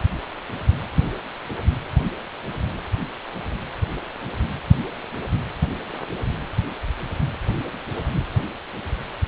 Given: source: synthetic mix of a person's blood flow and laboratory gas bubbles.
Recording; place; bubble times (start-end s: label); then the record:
Doppler ultrasound of blood flow; precordium
no bubbles
From the record:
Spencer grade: 0 (complete lack of bubble signals)